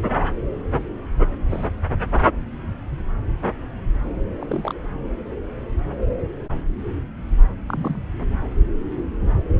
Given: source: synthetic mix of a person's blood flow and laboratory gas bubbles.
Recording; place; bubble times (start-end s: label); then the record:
Doppler ultrasound of blood flow; subclavian vein
1.49-1.67 s: bubbles
4.40-4.74 s: bubbles
7.68-8.01 s: bubbles
9.58-9.60 s: bubbles
From the record:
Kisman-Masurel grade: 121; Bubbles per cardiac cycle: 1 to 2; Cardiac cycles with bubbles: 10 to 50%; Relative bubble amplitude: barely perceptible (0.100 to 0.250); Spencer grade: 2 (many but less than half of the cardiac periods contain bubble signals, singularly or in groups); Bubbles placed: anywhere in the cardiac cycle